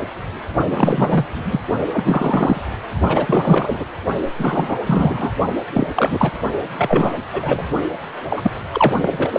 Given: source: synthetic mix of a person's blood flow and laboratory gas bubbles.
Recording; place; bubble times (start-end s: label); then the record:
Doppler ultrasound of blood flow; precordium
0.69-1.25 s: bubbles
1.31-1.60 s: bubbles
1.92-2.61 s: bubbles
3.07-3.85 s: bubbles
4.38-4.79 s: bubbles
4.85-5.33 s: bubbles
5.74-5.87 s: bubbles
5.95-6.31 s: bubbles
6.77-7.13 s: bubbles
7.33-7.68 s: bubbles
8.29-8.51 s: bubbles
8.73-9.28 s: bubbles
9.33-9.39 s: bubbles
From the record:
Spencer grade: 3 (all of the cardiac periods contain showers or single bubble signals, but not dominating or overriding the cardiac motion signals); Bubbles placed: only in the low amplitude regions of the cardiac cycle